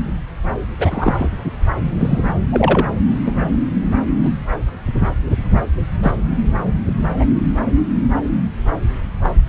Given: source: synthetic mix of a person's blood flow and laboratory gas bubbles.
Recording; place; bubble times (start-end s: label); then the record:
Doppler ultrasound of blood flow; subclavian vein
0.79-1.29 s: bubbles
1.99-2.34 s: bubbles
2.51-2.87 s: bubbles
3.25-3.45 s: bubbles
4.22-4.31 s: bubbles
6.02-6.12 s: bubbles
7.19-7.25 s: bubbles
9.23-9.30 s: bubbles
From the record:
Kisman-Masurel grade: 123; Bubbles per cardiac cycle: 1 to 2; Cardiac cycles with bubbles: 10 to 50%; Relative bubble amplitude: loud (0.450 to 0.775); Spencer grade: 2 (many but less than half of the cardiac periods contain bubble signals, singularly or in groups); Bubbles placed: anywhere in the cardiac cycle